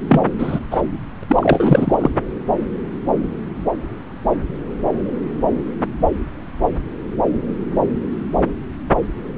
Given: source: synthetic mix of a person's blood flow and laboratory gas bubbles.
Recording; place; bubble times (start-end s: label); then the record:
Doppler ultrasound of blood flow; subclavian vein
0.08-0.23 s: bubbles
0.38-0.59 s: bubbles
0.71-0.82 s: bubbles
1.28-2.10 s: bubbles
From the record:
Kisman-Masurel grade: 223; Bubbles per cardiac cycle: several, 3 to 8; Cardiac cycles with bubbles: 10 to 50%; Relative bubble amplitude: loud (0.450 to 0.775); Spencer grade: 2 (many but less than half of the cardiac periods contain bubble signals, singularly or in groups); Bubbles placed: anywhere in the cardiac cycle